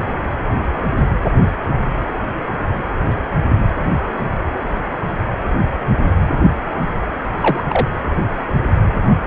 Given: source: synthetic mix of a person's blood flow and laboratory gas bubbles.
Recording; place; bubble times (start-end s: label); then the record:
Doppler ultrasound of blood flow; precordium
7.41-7.63 s: bubbles
7.68-7.87 s: bubbles
From the record:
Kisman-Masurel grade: 113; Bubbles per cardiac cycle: 1 to 2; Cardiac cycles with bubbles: 1 to 10%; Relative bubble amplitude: loud (0.450 to 0.775); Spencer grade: 1 (occasional bubble signal discernible with the cardiac motion signal, with majority of cardiac periods free of bubbles); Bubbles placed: anywhere in the cardiac cycle